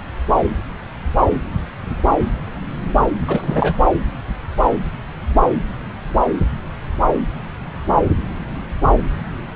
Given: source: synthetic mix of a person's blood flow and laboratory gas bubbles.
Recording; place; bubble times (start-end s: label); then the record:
Doppler ultrasound of blood flow; subclavian vein
3.27-3.75 s: bubbles
From the record:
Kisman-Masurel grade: 212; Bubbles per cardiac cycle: several, 3 to 8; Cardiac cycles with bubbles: 1 to 10%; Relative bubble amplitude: moderate (0.250 to 0.450); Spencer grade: 1 (occasional bubble signal discernible with the cardiac motion signal, with majority of cardiac periods free of bubbles); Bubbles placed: anywhere in the cardiac cycle